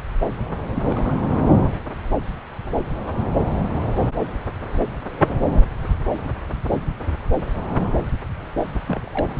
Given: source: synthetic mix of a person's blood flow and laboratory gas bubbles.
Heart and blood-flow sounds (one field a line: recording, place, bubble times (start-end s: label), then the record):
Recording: Doppler ultrasound of blood flow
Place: subclavian vein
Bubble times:
0.75-0.82 s: bubbles
0.88-1.17 s: bubbles
8.87-9.01 s: bubbles
9.04-9.33 s: bubbles
From the record:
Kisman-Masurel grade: 121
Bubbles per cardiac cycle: 1 to 2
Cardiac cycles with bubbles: 10 to 50%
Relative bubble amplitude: barely perceptible (0.100 to 0.250)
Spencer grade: 2 (many but less than half of the cardiac periods contain bubble signals, singularly or in groups)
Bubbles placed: anywhere in the cardiac cycle